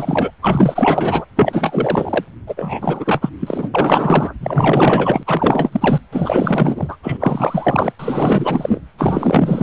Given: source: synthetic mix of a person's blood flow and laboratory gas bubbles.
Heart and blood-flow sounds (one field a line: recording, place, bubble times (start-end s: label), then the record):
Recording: Doppler ultrasound of blood flow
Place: precordium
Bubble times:
0.00-0.31 s: bubbles
0.41-1.25 s: bubbles
1.36-2.24 s: bubbles
2.47-3.29 s: bubbles
3.40-3.69 s: bubbles
3.73-4.33 s: bubbles
4.40-5.23 s: bubbles
5.27-6.01 s: bubbles
6.12-6.97 s: bubbles
7.03-7.17 s: bubbles
7.20-7.92 s: bubbles
7.99-8.80 s: bubbles
8.97-9.62 s: bubbles
From the record:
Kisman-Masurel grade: 444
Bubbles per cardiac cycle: continuous sound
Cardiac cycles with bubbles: 100%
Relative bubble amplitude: maximal (0.775 to 0.999)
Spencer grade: 4 (maximum detectable bubble signal sounding continuously throughout systole and diastole of every cardiac period, and overriding the amplitude of the normal cardiac signals)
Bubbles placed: anywhere in the cardiac cycle